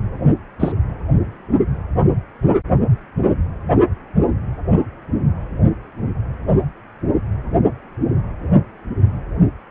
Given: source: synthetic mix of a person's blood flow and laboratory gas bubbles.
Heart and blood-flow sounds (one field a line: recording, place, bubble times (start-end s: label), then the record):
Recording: Doppler ultrasound of blood flow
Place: precordium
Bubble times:
0.59-0.72 s: bubbles
From the record:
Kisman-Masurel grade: 113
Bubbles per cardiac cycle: 1 to 2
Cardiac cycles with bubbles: 1 to 10%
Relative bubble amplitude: loud (0.450 to 0.775)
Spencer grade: 1 (occasional bubble signal discernible with the cardiac motion signal, with majority of cardiac periods free of bubbles)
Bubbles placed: only in the low amplitude regions of the cardiac cycle